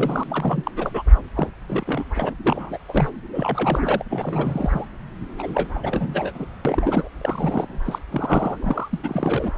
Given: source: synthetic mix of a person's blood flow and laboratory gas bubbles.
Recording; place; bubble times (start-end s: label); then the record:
Doppler ultrasound of blood flow; subclavian vein
0.00-0.24 s: bubbles
0.28-0.71 s: bubbles
0.76-1.02 s: bubbles
1.35-1.49 s: bubbles
1.67-2.04 s: bubbles
2.15-2.33 s: bubbles
2.46-2.78 s: bubbles
2.88-3.10 s: bubbles
3.33-4.04 s: bubbles
4.09-4.87 s: bubbles
5.38-5.79 s: bubbles
5.83-6.32 s: bubbles
6.34-6.46 s: bubbles
6.65-7.08 s: bubbles
7.21-7.79 s: bubbles
7.85-7.99 s: bubbles
8.11-8.88 s: bubbles
8.93-8.99 s: bubbles
9.03-9.52 s: bubbles
From the record:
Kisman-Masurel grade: 342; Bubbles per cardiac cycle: rolling drumbeat, 9 or more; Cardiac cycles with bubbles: 100%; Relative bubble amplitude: moderate (0.250 to 0.450); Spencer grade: 3 (all of the cardiac periods contain showers or single bubble signals, but not dominating or overriding the cardiac motion signals); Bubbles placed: anywhere in the cardiac cycle